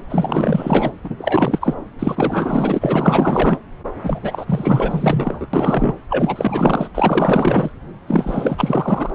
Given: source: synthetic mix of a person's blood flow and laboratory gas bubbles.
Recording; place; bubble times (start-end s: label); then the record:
Doppler ultrasound of blood flow; subclavian vein
0.00-0.03 s: bubbles
0.10-0.92 s: bubbles
1.04-1.74 s: bubbles
1.99-3.59 s: bubbles
4.03-4.20 s: bubbles
4.22-5.46 s: bubbles
5.53-5.95 s: bubbles
6.09-6.88 s: bubbles
6.95-7.72 s: bubbles
8.06-9.10 s: bubbles
From the record:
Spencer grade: 4 (maximum detectable bubble signal sounding continuously throughout systole and diastole of every cardiac period, and overriding the amplitude of the normal cardiac signals); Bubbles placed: anywhere in the cardiac cycle